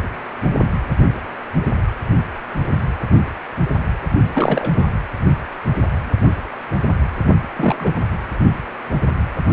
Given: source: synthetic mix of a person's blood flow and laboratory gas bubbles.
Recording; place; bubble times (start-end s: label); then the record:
Doppler ultrasound of blood flow; precordium
4.35-4.71 s: bubbles
4.76-4.86 s: bubbles
7.56-7.91 s: bubbles
From the record:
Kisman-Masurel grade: 222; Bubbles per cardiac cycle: several, 3 to 8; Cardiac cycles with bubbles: 10 to 50%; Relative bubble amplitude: moderate (0.250 to 0.450); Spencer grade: 2 (many but less than half of the cardiac periods contain bubble signals, singularly or in groups); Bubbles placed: anywhere in the cardiac cycle